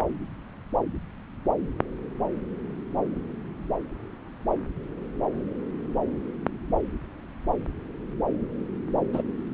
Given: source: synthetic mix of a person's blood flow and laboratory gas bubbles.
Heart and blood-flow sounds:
Doppler ultrasound of blood flow; subclavian vein
9.13-9.22 s: bubbles
From the record:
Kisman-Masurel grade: 122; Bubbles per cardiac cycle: 1 to 2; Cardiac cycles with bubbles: 10 to 50%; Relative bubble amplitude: moderate (0.250 to 0.450); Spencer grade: 2 (many but less than half of the cardiac periods contain bubble signals, singularly or in groups); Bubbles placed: anywhere in the cardiac cycle

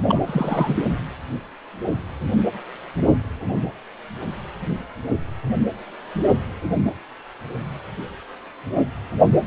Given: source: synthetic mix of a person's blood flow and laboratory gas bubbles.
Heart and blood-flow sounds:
Doppler ultrasound of blood flow; precordium
0.09-0.22 s: bubbles
0.27-0.84 s: bubbles
From the record:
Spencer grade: 1 (occasional bubble signal discernible with the cardiac motion signal, with majority of cardiac periods free of bubbles); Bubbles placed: anywhere in the cardiac cycle

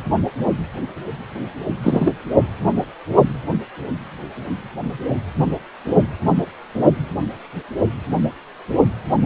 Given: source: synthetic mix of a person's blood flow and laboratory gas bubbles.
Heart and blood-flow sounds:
Doppler ultrasound of blood flow; precordium
1.82-2.13 s: bubbles
From the record:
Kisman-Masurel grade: 123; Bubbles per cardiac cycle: 1 to 2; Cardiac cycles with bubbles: 10 to 50%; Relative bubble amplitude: loud (0.450 to 0.775); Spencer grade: 2 (many but less than half of the cardiac periods contain bubble signals, singularly or in groups); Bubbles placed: only in the low amplitude regions of the cardiac cycle

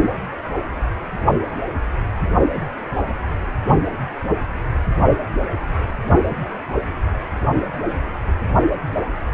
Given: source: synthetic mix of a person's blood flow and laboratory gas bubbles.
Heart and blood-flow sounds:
Doppler ultrasound of blood flow; precordium
no bubbles
From the record:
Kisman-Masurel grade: 000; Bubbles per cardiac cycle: 0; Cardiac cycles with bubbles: 0%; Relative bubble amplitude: no bubbles discernible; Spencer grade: 0 (complete lack of bubble signals)

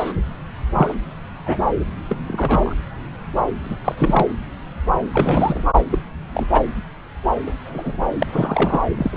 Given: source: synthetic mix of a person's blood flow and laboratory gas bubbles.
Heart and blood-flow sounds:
Doppler ultrasound of blood flow; subclavian vein
0.00-0.13 s: bubbles
0.73-0.95 s: bubbles
1.46-1.69 s: bubbles
2.09-2.19 s: bubbles
2.28-2.76 s: bubbles
3.63-3.76 s: bubbles
3.85-4.26 s: bubbles
5.13-5.65 s: bubbles
5.91-5.99 s: bubbles
6.33-6.47 s: bubbles
6.52-6.61 s: bubbles
7.46-7.54 s: bubbles
7.65-7.97 s: bubbles
8.00-8.05 s: bubbles
8.19-8.27 s: bubbles
8.31-8.82 s: bubbles
8.97-9.17 s: bubbles
From the record:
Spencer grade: 3 (all of the cardiac periods contain showers or single bubble signals, but not dominating or overriding the cardiac motion signals); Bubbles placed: anywhere in the cardiac cycle

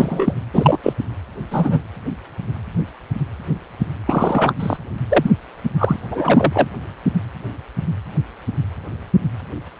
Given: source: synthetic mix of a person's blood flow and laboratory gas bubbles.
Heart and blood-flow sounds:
Doppler ultrasound of blood flow; precordium
0.00-0.35 s: bubbles
0.53-0.78 s: bubbles
0.83-0.93 s: bubbles
1.50-1.79 s: bubbles
4.06-4.53 s: bubbles
4.59-4.76 s: bubbles
5.09-5.30 s: bubbles
5.78-5.96 s: bubbles
6.11-6.68 s: bubbles
From the record:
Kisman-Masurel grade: 223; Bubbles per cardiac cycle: several, 3 to 8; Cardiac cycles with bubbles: 10 to 50%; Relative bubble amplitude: loud (0.450 to 0.775); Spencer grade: 2 (many but less than half of the cardiac periods contain bubble signals, singularly or in groups); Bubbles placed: anywhere in the cardiac cycle

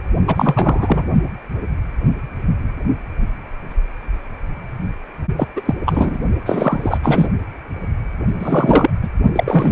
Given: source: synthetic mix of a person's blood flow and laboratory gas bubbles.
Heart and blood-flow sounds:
Doppler ultrasound of blood flow; precordium
0.27-1.09 s: bubbles
5.37-5.47 s: bubbles
5.55-5.61 s: bubbles
5.65-5.75 s: bubbles
5.85-6.18 s: bubbles
6.46-6.97 s: bubbles
7.02-7.28 s: bubbles
8.39-8.90 s: bubbles
9.03-9.10 s: bubbles
9.35-9.72 s: bubbles
From the record:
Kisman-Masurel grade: 333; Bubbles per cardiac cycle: rolling drumbeat, 9 or more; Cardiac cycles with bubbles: 50 to 99%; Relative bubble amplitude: loud (0.450 to 0.775); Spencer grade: 3 (all of the cardiac periods contain showers or single bubble signals, but not dominating or overriding the cardiac motion signals); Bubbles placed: only in the low amplitude regions of the cardiac cycle

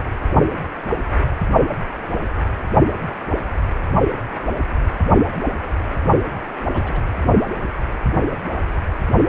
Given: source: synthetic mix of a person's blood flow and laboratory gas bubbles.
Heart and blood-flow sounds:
Doppler ultrasound of blood flow; precordium
6.73-7.01 s: bubbles
From the record:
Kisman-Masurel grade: 121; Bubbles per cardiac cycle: 1 to 2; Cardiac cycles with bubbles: 10 to 50%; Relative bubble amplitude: barely perceptible (0.100 to 0.250); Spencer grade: 2 (many but less than half of the cardiac periods contain bubble signals, singularly or in groups); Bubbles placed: only in the low amplitude regions of the cardiac cycle

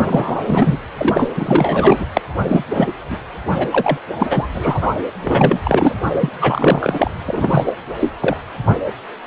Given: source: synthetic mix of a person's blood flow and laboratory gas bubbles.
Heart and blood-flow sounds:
Doppler ultrasound of blood flow; precordium
0.06-0.77 s: bubbles
0.97-1.29 s: bubbles
1.34-2.06 s: bubbles
2.14-2.21 s: bubbles
2.48-2.64 s: bubbles
2.70-2.92 s: bubbles
3.10-3.18 s: bubbles
3.58-3.68 s: bubbles
3.71-3.98 s: bubbles
4.18-4.46 s: bubbles
4.52-4.91 s: bubbles
5.24-5.59 s: bubbles
5.64-5.95 s: bubbles
6.19-6.29 s: bubbles
6.40-7.11 s: bubbles
7.26-7.72 s: bubbles
8.00-8.11 s: bubbles
8.20-8.37 s: bubbles
From the record:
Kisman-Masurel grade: 333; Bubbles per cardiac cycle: rolling drumbeat, 9 or more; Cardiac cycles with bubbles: 50 to 99%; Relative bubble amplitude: loud (0.450 to 0.775); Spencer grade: 3 (all of the cardiac periods contain showers or single bubble signals, but not dominating or overriding the cardiac motion signals); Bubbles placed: anywhere in the cardiac cycle

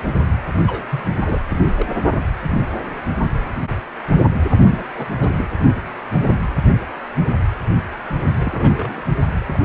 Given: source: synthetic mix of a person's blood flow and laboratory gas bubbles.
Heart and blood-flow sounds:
Doppler ultrasound of blood flow; precordium
0.67-0.84 s: bubbles
0.90-1.04 s: bubbles
1.25-1.40 s: bubbles
1.50-1.59 s: bubbles
1.62-1.86 s: bubbles
4.67-4.84 s: bubbles
4.95-5.06 s: bubbles
5.20-5.48 s: bubbles
8.38-9.02 s: bubbles
9.46-9.65 s: bubbles
From the record:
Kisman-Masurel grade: 221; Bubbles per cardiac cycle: several, 3 to 8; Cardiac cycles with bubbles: 10 to 50%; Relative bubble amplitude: barely perceptible (0.100 to 0.250); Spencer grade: 2 (many but less than half of the cardiac periods contain bubble signals, singularly or in groups); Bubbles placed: anywhere in the cardiac cycle

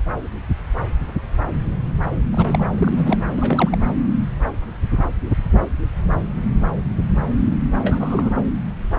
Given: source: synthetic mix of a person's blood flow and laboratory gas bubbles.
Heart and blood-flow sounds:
Doppler ultrasound of blood flow; subclavian vein
2.32-2.68 s: bubbles
2.75-3.23 s: bubbles
3.33-3.78 s: bubbles
7.85-8.30 s: bubbles
From the record:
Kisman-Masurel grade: 222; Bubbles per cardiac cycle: several, 3 to 8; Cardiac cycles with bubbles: 10 to 50%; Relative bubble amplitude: moderate (0.250 to 0.450); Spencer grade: 2 (many but less than half of the cardiac periods contain bubble signals, singularly or in groups); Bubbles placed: anywhere in the cardiac cycle

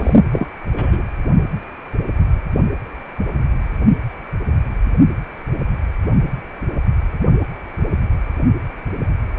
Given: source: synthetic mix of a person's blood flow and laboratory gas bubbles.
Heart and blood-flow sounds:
Doppler ultrasound of blood flow; precordium
0.00-0.20 s: bubbles
0.32-0.48 s: bubbles
0.73-1.03 s: bubbles
From the record:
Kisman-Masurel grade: 213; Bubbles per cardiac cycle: several, 3 to 8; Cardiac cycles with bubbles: 1 to 10%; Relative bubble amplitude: loud (0.450 to 0.775); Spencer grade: 1 (occasional bubble signal discernible with the cardiac motion signal, with majority of cardiac periods free of bubbles); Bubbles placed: anywhere in the cardiac cycle

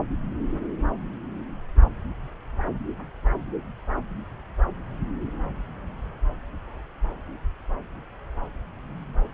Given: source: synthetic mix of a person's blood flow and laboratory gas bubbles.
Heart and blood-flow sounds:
Doppler ultrasound of blood flow; subclavian vein
no bubbles
From the record:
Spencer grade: 0 (complete lack of bubble signals)

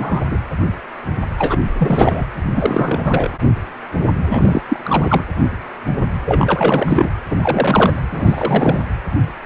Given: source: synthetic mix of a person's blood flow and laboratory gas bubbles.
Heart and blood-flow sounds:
Doppler ultrasound of blood flow; precordium
0.00-0.36 s: bubbles
1.38-1.57 s: bubbles
1.78-2.26 s: bubbles
2.55-3.30 s: bubbles
4.29-4.62 s: bubbles
4.68-4.79 s: bubbles
4.83-5.25 s: bubbles
6.25-7.10 s: bubbles
7.29-8.00 s: bubbles
8.12-8.84 s: bubbles
From the record:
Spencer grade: 3 (all of the cardiac periods contain showers or single bubble signals, but not dominating or overriding the cardiac motion signals); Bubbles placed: anywhere in the cardiac cycle

